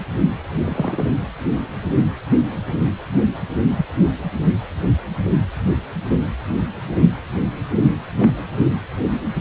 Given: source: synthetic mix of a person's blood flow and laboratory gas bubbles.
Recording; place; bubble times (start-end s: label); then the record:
Doppler ultrasound of blood flow; precordium
0.65-1.07 s: bubbles
3.75-3.86 s: bubbles
8.19-8.36 s: bubbles
From the record:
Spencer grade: 2 (many but less than half of the cardiac periods contain bubble signals, singularly or in groups); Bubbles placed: anywhere in the cardiac cycle